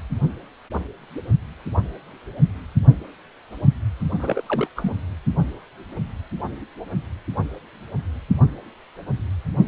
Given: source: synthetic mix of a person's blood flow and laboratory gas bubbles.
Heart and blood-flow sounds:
Doppler ultrasound of blood flow; precordium
4.19-4.42 s: bubbles
4.49-4.68 s: bubbles
4.76-4.92 s: bubbles
From the record:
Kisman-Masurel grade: 211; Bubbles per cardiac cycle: several, 3 to 8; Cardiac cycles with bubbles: 1 to 10%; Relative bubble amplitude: barely perceptible (0.100 to 0.250); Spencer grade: 1 (occasional bubble signal discernible with the cardiac motion signal, with majority of cardiac periods free of bubbles); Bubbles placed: only in the low amplitude regions of the cardiac cycle

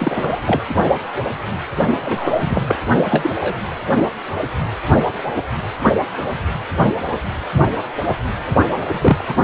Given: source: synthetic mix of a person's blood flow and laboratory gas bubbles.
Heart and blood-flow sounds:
Doppler ultrasound of blood flow; precordium
0.00-0.39 s: bubbles
0.46-0.61 s: bubbles
2.04-2.75 s: bubbles
3.09-3.32 s: bubbles
3.40-3.58 s: bubbles
8.86-9.24 s: bubbles
9.28-9.35 s: bubbles
From the record:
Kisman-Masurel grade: 232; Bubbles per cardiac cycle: several, 3 to 8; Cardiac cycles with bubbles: 50 to 99%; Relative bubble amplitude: moderate (0.250 to 0.450); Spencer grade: 3 (all of the cardiac periods contain showers or single bubble signals, but not dominating or overriding the cardiac motion signals); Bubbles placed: only in the low amplitude regions of the cardiac cycle

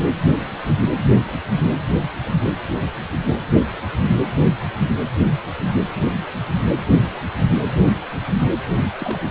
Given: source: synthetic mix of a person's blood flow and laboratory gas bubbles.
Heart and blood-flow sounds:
Doppler ultrasound of blood flow; precordium
8.98-9.19 s: bubbles
9.22-9.29 s: bubbles
From the record:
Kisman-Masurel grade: 211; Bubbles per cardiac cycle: several, 3 to 8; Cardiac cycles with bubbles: 1 to 10%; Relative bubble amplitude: barely perceptible (0.100 to 0.250); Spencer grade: 1 (occasional bubble signal discernible with the cardiac motion signal, with majority of cardiac periods free of bubbles); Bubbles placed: only in the low amplitude regions of the cardiac cycle

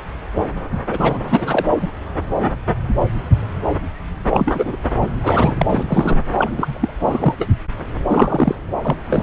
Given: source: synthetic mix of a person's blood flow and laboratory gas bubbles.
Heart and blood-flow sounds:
Doppler ultrasound of blood flow; subclavian vein
0.90-1.20 s: bubbles
1.28-1.65 s: bubbles
1.81-1.89 s: bubbles
4.30-4.76 s: bubbles
5.01-5.07 s: bubbles
5.22-5.65 s: bubbles
5.69-6.23 s: bubbles
6.37-6.92 s: bubbles
7.02-7.34 s: bubbles
7.38-7.48 s: bubbles
8.09-8.55 s: bubbles
8.85-8.96 s: bubbles
9.07-9.23 s: bubbles
From the record:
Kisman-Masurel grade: 233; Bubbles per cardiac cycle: several, 3 to 8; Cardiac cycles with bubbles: 50 to 99%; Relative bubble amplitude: loud (0.450 to 0.775); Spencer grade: 3 (all of the cardiac periods contain showers or single bubble signals, but not dominating or overriding the cardiac motion signals); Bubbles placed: anywhere in the cardiac cycle

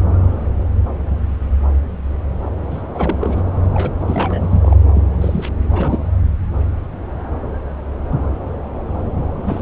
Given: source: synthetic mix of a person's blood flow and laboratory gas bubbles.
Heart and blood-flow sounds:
Doppler ultrasound of blood flow; subclavian vein
2.70-2.82 s: bubbles
2.94-3.17 s: bubbles
3.21-3.42 s: bubbles
3.73-3.91 s: bubbles
4.01-4.78 s: bubbles
4.94-5.04 s: bubbles
5.21-5.49 s: bubbles
5.73-5.99 s: bubbles
9.46-9.61 s: bubbles
From the record:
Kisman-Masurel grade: 332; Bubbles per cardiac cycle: rolling drumbeat, 9 or more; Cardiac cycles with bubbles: 50 to 99%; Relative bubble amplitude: moderate (0.250 to 0.450); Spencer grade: 3 (all of the cardiac periods contain showers or single bubble signals, but not dominating or overriding the cardiac motion signals); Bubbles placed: anywhere in the cardiac cycle

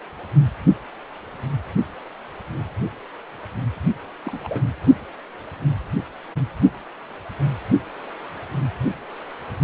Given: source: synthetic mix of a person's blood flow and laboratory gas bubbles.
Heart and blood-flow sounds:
Doppler ultrasound of blood flow; precordium
4.25-4.60 s: bubbles
From the record:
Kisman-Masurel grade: 111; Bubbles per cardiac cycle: 1 to 2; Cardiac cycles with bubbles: 1 to 10%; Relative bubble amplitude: barely perceptible (0.100 to 0.250); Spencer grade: 1 (occasional bubble signal discernible with the cardiac motion signal, with majority of cardiac periods free of bubbles); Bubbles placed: anywhere in the cardiac cycle

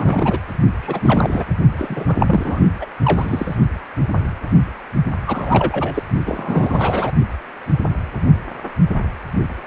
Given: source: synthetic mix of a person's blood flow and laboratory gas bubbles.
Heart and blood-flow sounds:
Doppler ultrasound of blood flow; precordium
0.00-0.38 s: bubbles
0.80-1.45 s: bubbles
1.79-2.17 s: bubbles
2.19-2.70 s: bubbles
2.81-2.85 s: bubbles
3.03-3.56 s: bubbles
5.26-6.03 s: bubbles
6.25-7.11 s: bubbles
From the record:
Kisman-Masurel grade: 333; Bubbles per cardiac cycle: rolling drumbeat, 9 or more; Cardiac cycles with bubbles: 50 to 99%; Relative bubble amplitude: loud (0.450 to 0.775); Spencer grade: 3 (all of the cardiac periods contain showers or single bubble signals, but not dominating or overriding the cardiac motion signals); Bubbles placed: only in the low amplitude regions of the cardiac cycle

